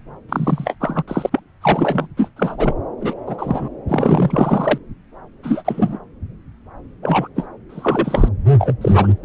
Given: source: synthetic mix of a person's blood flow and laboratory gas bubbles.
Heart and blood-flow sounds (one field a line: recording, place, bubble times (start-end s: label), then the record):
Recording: Doppler ultrasound of blood flow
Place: subclavian vein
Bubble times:
0.29-0.75 s: bubbles
0.80-1.03 s: bubbles
1.07-1.40 s: bubbles
1.61-2.08 s: bubbles
2.17-2.29 s: bubbles
2.36-2.74 s: bubbles
3.00-3.14 s: bubbles
3.26-3.68 s: bubbles
3.88-4.78 s: bubbles
5.43-5.99 s: bubbles
7.02-7.28 s: bubbles
7.36-7.47 s: bubbles
7.69-8.29 s: bubbles
8.58-8.73 s: bubbles
8.81-9.12 s: bubbles
9.22-9.25 s: bubbles
From the record:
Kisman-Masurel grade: 233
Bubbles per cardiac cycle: several, 3 to 8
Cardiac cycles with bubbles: 50 to 99%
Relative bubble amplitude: loud (0.450 to 0.775)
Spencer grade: 3 (all of the cardiac periods contain showers or single bubble signals, but not dominating or overriding the cardiac motion signals)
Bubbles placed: anywhere in the cardiac cycle